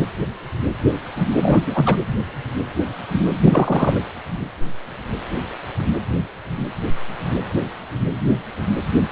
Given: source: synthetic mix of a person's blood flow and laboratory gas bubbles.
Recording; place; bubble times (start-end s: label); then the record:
Doppler ultrasound of blood flow; precordium
1.42-1.60 s: bubbles
1.67-1.96 s: bubbles
3.44-4.00 s: bubbles
From the record:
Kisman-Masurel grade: 213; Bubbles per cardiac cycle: several, 3 to 8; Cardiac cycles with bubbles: 1 to 10%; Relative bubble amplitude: loud (0.450 to 0.775); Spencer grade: 1 (occasional bubble signal discernible with the cardiac motion signal, with majority of cardiac periods free of bubbles); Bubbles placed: anywhere in the cardiac cycle